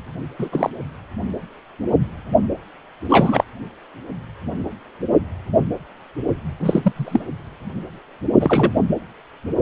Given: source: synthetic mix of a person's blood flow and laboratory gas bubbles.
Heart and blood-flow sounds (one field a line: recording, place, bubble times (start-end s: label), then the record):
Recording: Doppler ultrasound of blood flow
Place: precordium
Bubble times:
0.39-0.49 s: bubbles
0.52-0.70 s: bubbles
3.09-3.44 s: bubbles
6.59-6.92 s: bubbles
6.96-7.25 s: bubbles
8.40-8.81 s: bubbles
From the record:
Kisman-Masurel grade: 223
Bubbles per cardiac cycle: several, 3 to 8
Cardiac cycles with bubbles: 10 to 50%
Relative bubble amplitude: loud (0.450 to 0.775)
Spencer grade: 2 (many but less than half of the cardiac periods contain bubble signals, singularly or in groups)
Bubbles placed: anywhere in the cardiac cycle